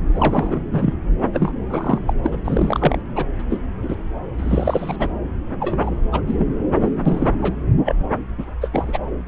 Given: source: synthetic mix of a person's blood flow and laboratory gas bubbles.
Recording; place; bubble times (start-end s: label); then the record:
Doppler ultrasound of blood flow; subclavian vein
0.14-0.59 s: bubbles
0.72-0.94 s: bubbles
1.33-1.52 s: bubbles
1.70-1.98 s: bubbles
2.07-2.13 s: bubbles
2.23-2.35 s: bubbles
2.44-3.01 s: bubbles
3.15-3.25 s: bubbles
3.39-3.42 s: bubbles
3.50-3.61 s: bubbles
3.83-3.96 s: bubbles
4.38-4.96 s: bubbles
4.99-5.08 s: bubbles
5.60-5.96 s: bubbles
6.12-6.20 s: bubbles
6.26-6.34 s: bubbles
6.38-6.53 s: bubbles
6.80-6.89 s: bubbles
7.05-7.30 s: bubbles
7.42-7.54 s: bubbles
7.85-7.95 s: bubbles
8.38-8.46 s: bubbles
8.61-8.69 s: bubbles
8.72-8.98 s: bubbles
From the record:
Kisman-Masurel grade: 232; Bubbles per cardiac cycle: several, 3 to 8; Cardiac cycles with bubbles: 50 to 99%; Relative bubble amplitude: moderate (0.250 to 0.450); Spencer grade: 3 (all of the cardiac periods contain showers or single bubble signals, but not dominating or overriding the cardiac motion signals); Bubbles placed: anywhere in the cardiac cycle